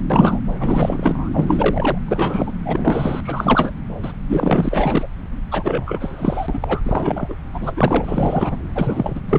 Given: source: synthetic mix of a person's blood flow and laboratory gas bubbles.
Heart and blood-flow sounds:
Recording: Doppler ultrasound of blood flow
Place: subclavian vein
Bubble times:
0.10-0.40 s: bubbles
0.59-1.29 s: bubbles
1.33-1.98 s: bubbles
2.08-2.53 s: bubbles
2.65-3.20 s: bubbles
3.23-3.71 s: bubbles
4.03-4.12 s: bubbles
4.29-5.07 s: bubbles
5.51-6.82 s: bubbles
6.85-7.36 s: bubbles
7.53-7.72 s: bubbles
7.77-8.57 s: bubbles
8.75-9.21 s: bubbles
9.29-9.38 s: bubbles
From the record:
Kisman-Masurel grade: 343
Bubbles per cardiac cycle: rolling drumbeat, 9 or more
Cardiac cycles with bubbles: 100%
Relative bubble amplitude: loud (0.450 to 0.775)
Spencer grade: 3 (all of the cardiac periods contain showers or single bubble signals, but not dominating or overriding the cardiac motion signals)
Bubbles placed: anywhere in the cardiac cycle

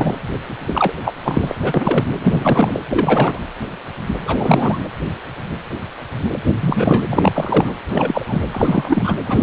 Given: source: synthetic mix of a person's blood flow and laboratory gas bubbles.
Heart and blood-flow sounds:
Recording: Doppler ultrasound of blood flow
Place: precordium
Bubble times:
0.00-0.13 s: bubbles
0.67-0.94 s: bubbles
1.04-1.12 s: bubbles
1.24-1.55 s: bubbles
1.64-2.04 s: bubbles
2.20-2.79 s: bubbles
2.90-3.38 s: bubbles
4.25-4.79 s: bubbles
6.33-6.38 s: bubbles
6.61-7.03 s: bubbles
7.07-7.73 s: bubbles
7.89-8.42 s: bubbles
8.51-9.14 s: bubbles
9.25-9.43 s: bubbles
From the record:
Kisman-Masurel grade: 333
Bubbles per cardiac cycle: rolling drumbeat, 9 or more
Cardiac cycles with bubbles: 50 to 99%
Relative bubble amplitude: loud (0.450 to 0.775)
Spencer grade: 3 (all of the cardiac periods contain showers or single bubble signals, but not dominating or overriding the cardiac motion signals)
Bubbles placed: anywhere in the cardiac cycle

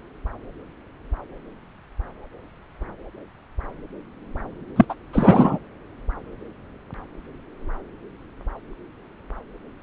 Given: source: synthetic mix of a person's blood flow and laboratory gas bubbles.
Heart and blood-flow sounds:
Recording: Doppler ultrasound of blood flow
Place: subclavian vein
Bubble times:
4.76-4.85 s: bubbles
4.89-4.95 s: bubbles
5.12-5.58 s: bubbles
From the record:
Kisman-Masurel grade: 213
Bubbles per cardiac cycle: several, 3 to 8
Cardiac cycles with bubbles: 1 to 10%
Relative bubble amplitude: loud (0.450 to 0.775)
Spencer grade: 1 (occasional bubble signal discernible with the cardiac motion signal, with majority of cardiac periods free of bubbles)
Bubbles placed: anywhere in the cardiac cycle

